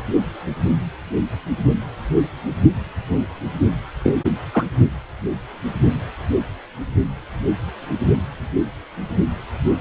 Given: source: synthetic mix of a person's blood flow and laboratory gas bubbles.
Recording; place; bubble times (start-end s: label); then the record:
Doppler ultrasound of blood flow; precordium
4.04-4.12 s: bubbles
4.52-4.65 s: bubbles
From the record:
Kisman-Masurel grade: 113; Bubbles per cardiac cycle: 1 to 2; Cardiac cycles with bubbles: 1 to 10%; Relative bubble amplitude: loud (0.450 to 0.775); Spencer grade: 1 (occasional bubble signal discernible with the cardiac motion signal, with majority of cardiac periods free of bubbles); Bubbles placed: only in the low amplitude regions of the cardiac cycle